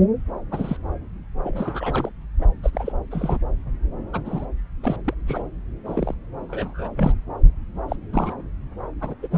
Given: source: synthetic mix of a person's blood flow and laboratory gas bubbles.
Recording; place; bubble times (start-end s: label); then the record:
Doppler ultrasound of blood flow; subclavian vein
0.50-0.76 s: bubbles
1.44-2.10 s: bubbles
2.40-2.47 s: bubbles
2.62-2.92 s: bubbles
3.11-3.38 s: bubbles
4.12-4.20 s: bubbles
4.25-4.46 s: bubbles
4.83-4.96 s: bubbles
5.04-5.14 s: bubbles
5.25-5.42 s: bubbles
5.85-6.14 s: bubbles
6.48-6.89 s: bubbles
6.96-7.14 s: bubbles
7.88-7.96 s: bubbles
8.12-8.34 s: bubbles
9.01-9.15 s: bubbles
9.22-9.28 s: bubbles
9.31-9.38 s: bubbles
From the record:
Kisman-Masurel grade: 242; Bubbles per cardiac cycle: several, 3 to 8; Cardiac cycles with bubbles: 100%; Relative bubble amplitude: moderate (0.250 to 0.450); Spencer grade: 3 (all of the cardiac periods contain showers or single bubble signals, but not dominating or overriding the cardiac motion signals); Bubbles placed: anywhere in the cardiac cycle